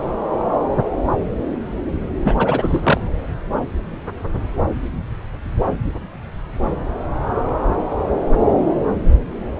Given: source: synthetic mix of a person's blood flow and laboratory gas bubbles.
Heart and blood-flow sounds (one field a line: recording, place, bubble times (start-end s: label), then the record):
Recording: Doppler ultrasound of blood flow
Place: subclavian vein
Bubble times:
2.24-2.35 s: bubbles
2.38-3.01 s: bubbles
From the record:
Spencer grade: 2 (many but less than half of the cardiac periods contain bubble signals, singularly or in groups)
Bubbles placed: anywhere in the cardiac cycle